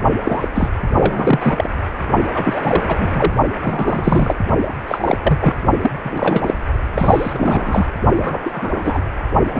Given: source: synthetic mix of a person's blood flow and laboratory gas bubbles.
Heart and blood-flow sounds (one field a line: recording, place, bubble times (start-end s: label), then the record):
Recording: Doppler ultrasound of blood flow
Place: precordium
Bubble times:
0.22-0.48 s: bubbles
0.54-0.69 s: bubbles
0.92-1.70 s: bubbles
2.35-3.33 s: bubbles
3.64-4.36 s: bubbles
4.68-4.73 s: bubbles
4.88-5.18 s: bubbles
5.22-5.54 s: bubbles
5.81-5.91 s: bubbles
6.03-6.54 s: bubbles
6.94-7.86 s: bubbles
8.18-9.03 s: bubbles
9.53-9.59 s: bubbles
From the record:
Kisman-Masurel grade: 343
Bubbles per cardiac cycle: rolling drumbeat, 9 or more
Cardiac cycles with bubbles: 100%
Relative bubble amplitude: loud (0.450 to 0.775)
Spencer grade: 3 (all of the cardiac periods contain showers or single bubble signals, but not dominating or overriding the cardiac motion signals)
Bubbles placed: only in the low amplitude regions of the cardiac cycle